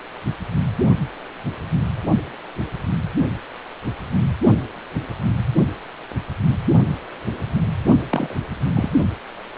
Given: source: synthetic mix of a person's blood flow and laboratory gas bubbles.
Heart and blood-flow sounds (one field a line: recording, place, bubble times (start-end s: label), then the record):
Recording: Doppler ultrasound of blood flow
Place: precordium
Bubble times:
8.10-8.34 s: bubbles
8.74-8.89 s: bubbles
From the record:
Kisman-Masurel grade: 112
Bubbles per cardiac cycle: 1 to 2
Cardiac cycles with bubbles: 1 to 10%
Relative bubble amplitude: moderate (0.250 to 0.450)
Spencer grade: 1 (occasional bubble signal discernible with the cardiac motion signal, with majority of cardiac periods free of bubbles)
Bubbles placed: only in the low amplitude regions of the cardiac cycle